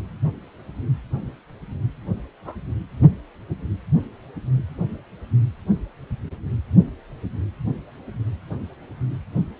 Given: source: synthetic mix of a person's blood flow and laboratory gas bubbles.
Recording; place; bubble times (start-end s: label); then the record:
Doppler ultrasound of blood flow; precordium
2.45-2.55 s: bubbles
From the record:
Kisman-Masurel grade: 121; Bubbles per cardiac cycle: 1 to 2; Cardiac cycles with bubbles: 10 to 50%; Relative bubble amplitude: barely perceptible (0.100 to 0.250); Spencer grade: 2 (many but less than half of the cardiac periods contain bubble signals, singularly or in groups); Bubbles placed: only in the low amplitude regions of the cardiac cycle